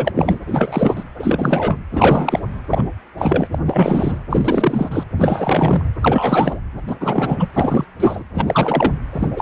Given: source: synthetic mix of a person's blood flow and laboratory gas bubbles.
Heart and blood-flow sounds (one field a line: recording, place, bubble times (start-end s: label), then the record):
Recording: Doppler ultrasound of blood flow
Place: precordium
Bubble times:
0.00-0.12 s: bubbles
0.15-0.39 s: bubbles
0.47-1.03 s: bubbles
1.19-1.80 s: bubbles
1.91-2.40 s: bubbles
2.70-2.84 s: bubbles
3.17-3.49 s: bubbles
3.51-3.58 s: bubbles
3.66-4.19 s: bubbles
4.29-5.04 s: bubbles
5.17-5.82 s: bubbles
6.01-6.60 s: bubbles
6.87-6.96 s: bubbles
7.00-7.49 s: bubbles
7.53-7.84 s: bubbles
8.00-8.24 s: bubbles
8.34-8.93 s: bubbles
9.12-9.29 s: bubbles
9.35-9.41 s: bubbles
From the record:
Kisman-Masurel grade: 343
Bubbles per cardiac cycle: rolling drumbeat, 9 or more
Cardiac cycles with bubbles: 100%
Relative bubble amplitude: loud (0.450 to 0.775)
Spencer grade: 3 (all of the cardiac periods contain showers or single bubble signals, but not dominating or overriding the cardiac motion signals)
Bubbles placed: anywhere in the cardiac cycle